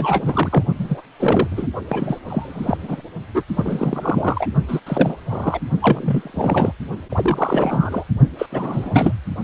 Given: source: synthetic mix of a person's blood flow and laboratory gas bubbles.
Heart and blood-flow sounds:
Doppler ultrasound of blood flow; precordium
0.00-0.64 s: bubbles
0.78-1.02 s: bubbles
1.19-1.48 s: bubbles
1.51-1.68 s: bubbles
1.88-2.20 s: bubbles
2.27-3.01 s: bubbles
3.35-3.43 s: bubbles
3.48-4.47 s: bubbles
4.68-4.80 s: bubbles
4.86-5.17 s: bubbles
5.29-5.60 s: bubbles
5.82-6.72 s: bubbles
7.09-8.04 s: bubbles
8.38-8.46 s: bubbles
8.52-9.13 s: bubbles
From the record:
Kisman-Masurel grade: 343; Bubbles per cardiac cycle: rolling drumbeat, 9 or more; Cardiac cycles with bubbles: 100%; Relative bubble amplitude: loud (0.450 to 0.775); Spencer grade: 3 (all of the cardiac periods contain showers or single bubble signals, but not dominating or overriding the cardiac motion signals); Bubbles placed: only in the low amplitude regions of the cardiac cycle

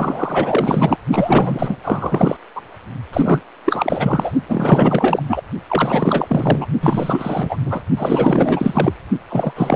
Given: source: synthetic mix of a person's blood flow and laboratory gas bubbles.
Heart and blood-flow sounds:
Doppler ultrasound of blood flow; precordium
0.00-0.98 s: bubbles
1.12-1.76 s: bubbles
1.84-2.37 s: bubbles
2.55-2.61 s: bubbles
3.13-3.40 s: bubbles
3.66-4.31 s: bubbles
4.49-5.22 s: bubbles
5.29-5.42 s: bubbles
5.69-6.67 s: bubbles
6.80-7.58 s: bubbles
7.64-7.80 s: bubbles
7.97-8.94 s: bubbles
9.29-9.75 s: bubbles
From the record:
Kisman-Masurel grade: 444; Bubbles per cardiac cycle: continuous sound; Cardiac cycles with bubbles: 100%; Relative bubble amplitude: maximal (0.775 to 0.999); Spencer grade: 4 (maximum detectable bubble signal sounding continuously throughout systole and diastole of every cardiac period, and overriding the amplitude of the normal cardiac signals); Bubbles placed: only in the low amplitude regions of the cardiac cycle

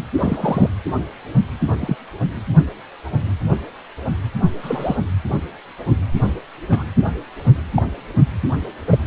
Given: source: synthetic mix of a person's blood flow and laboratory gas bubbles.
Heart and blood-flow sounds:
Doppler ultrasound of blood flow; precordium
0.18-0.69 s: bubbles
1.67-1.73 s: bubbles
1.80-1.96 s: bubbles
4.62-4.96 s: bubbles
6.71-6.85 s: bubbles
7.75-7.83 s: bubbles
8.86-8.98 s: bubbles
From the record:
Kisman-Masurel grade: 122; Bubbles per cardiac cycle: 1 to 2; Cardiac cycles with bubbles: 10 to 50%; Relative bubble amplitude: moderate (0.250 to 0.450); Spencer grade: 2 (many but less than half of the cardiac periods contain bubble signals, singularly or in groups); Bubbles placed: anywhere in the cardiac cycle

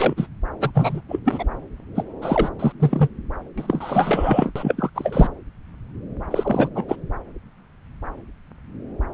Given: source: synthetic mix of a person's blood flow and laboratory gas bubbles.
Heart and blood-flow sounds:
Doppler ultrasound of blood flow; subclavian vein
0.00-0.27 s: bubbles
0.60-0.72 s: bubbles
0.74-1.02 s: bubbles
1.08-1.20 s: bubbles
1.25-1.45 s: bubbles
1.95-2.03 s: bubbles
2.21-2.50 s: bubbles
2.59-2.73 s: bubbles
2.79-3.08 s: bubbles
3.58-4.51 s: bubbles
4.55-4.90 s: bubbles
4.95-5.29 s: bubbles
6.30-6.69 s: bubbles
6.75-6.84 s: bubbles
6.88-6.96 s: bubbles
From the record:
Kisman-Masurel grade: 333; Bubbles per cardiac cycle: rolling drumbeat, 9 or more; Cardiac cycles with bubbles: 50 to 99%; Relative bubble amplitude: loud (0.450 to 0.775); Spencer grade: 3 (all of the cardiac periods contain showers or single bubble signals, but not dominating or overriding the cardiac motion signals); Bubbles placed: anywhere in the cardiac cycle

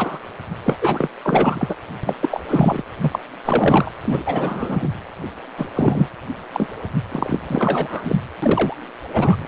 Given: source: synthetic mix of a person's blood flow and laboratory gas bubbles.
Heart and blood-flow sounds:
Doppler ultrasound of blood flow; precordium
0.00-0.17 s: bubbles
0.65-0.77 s: bubbles
0.81-1.08 s: bubbles
1.23-1.74 s: bubbles
2.03-2.15 s: bubbles
2.21-2.40 s: bubbles
2.48-2.83 s: bubbles
3.00-3.19 s: bubbles
3.45-3.90 s: bubbles
4.03-4.24 s: bubbles
4.26-4.89 s: bubbles
5.57-5.68 s: bubbles
5.75-6.08 s: bubbles
6.54-6.67 s: bubbles
7.12-7.38 s: bubbles
7.49-8.20 s: bubbles
8.42-8.77 s: bubbles
9.12-9.46 s: bubbles
From the record:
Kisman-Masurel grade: 342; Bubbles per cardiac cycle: rolling drumbeat, 9 or more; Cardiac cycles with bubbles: 100%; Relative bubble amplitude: moderate (0.250 to 0.450); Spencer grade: 3 (all of the cardiac periods contain showers or single bubble signals, but not dominating or overriding the cardiac motion signals); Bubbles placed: anywhere in the cardiac cycle

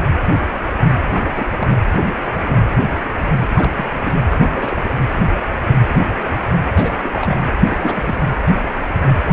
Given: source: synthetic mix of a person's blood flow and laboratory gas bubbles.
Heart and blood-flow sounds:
Doppler ultrasound of blood flow; precordium
0.00-0.05 s: bubbles
1.10-1.25 s: bubbles
1.34-1.68 s: bubbles
3.56-3.71 s: bubbles
3.74-3.87 s: bubbles
4.02-4.19 s: bubbles
4.30-4.35 s: bubbles
4.51-4.77 s: bubbles
4.88-4.93 s: bubbles
6.74-6.95 s: bubbles
7.02-7.37 s: bubbles
7.66-8.21 s: bubbles
From the record:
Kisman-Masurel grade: 222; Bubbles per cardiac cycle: several, 3 to 8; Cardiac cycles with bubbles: 10 to 50%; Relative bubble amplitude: moderate (0.250 to 0.450); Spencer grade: 2 (many but less than half of the cardiac periods contain bubble signals, singularly or in groups); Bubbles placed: anywhere in the cardiac cycle

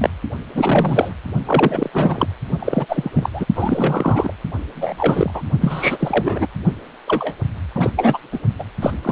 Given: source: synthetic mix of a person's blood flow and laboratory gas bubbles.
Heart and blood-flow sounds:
Doppler ultrasound of blood flow; precordium
0.00-0.09 s: bubbles
0.54-1.14 s: bubbles
1.45-1.90 s: bubbles
1.93-2.27 s: bubbles
2.59-2.86 s: bubbles
2.88-3.09 s: bubbles
3.13-3.29 s: bubbles
3.33-3.46 s: bubbles
3.55-4.33 s: bubbles
4.75-5.30 s: bubbles
5.33-5.42 s: bubbles
5.60-6.46 s: bubbles
7.07-7.34 s: bubbles
7.74-7.90 s: bubbles
7.96-8.18 s: bubbles
8.32-8.39 s: bubbles
8.59-8.64 s: bubbles
8.81-8.92 s: bubbles
9.03-9.12 s: bubbles
From the record:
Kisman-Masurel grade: 343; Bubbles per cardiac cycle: rolling drumbeat, 9 or more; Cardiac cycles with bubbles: 100%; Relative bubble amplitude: loud (0.450 to 0.775); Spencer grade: 3 (all of the cardiac periods contain showers or single bubble signals, but not dominating or overriding the cardiac motion signals); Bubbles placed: only in the low amplitude regions of the cardiac cycle

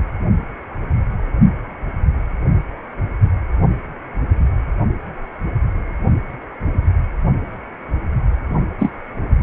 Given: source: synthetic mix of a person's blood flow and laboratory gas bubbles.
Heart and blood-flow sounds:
Doppler ultrasound of blood flow; precordium
8.79-8.93 s: bubbles
From the record:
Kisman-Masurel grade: 113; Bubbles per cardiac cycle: 1 to 2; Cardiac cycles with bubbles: 1 to 10%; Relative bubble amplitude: loud (0.450 to 0.775); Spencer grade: 1 (occasional bubble signal discernible with the cardiac motion signal, with majority of cardiac periods free of bubbles); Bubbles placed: only in the low amplitude regions of the cardiac cycle

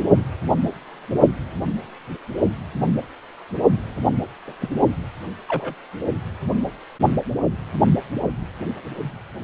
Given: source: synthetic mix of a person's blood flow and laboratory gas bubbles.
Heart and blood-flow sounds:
Doppler ultrasound of blood flow; precordium
4.47-4.53 s: bubbles
4.59-4.69 s: bubbles
5.48-5.74 s: bubbles
From the record:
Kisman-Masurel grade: 122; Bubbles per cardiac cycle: 1 to 2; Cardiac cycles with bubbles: 10 to 50%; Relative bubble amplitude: moderate (0.250 to 0.450); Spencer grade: 2 (many but less than half of the cardiac periods contain bubble signals, singularly or in groups); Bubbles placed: only in the low amplitude regions of the cardiac cycle

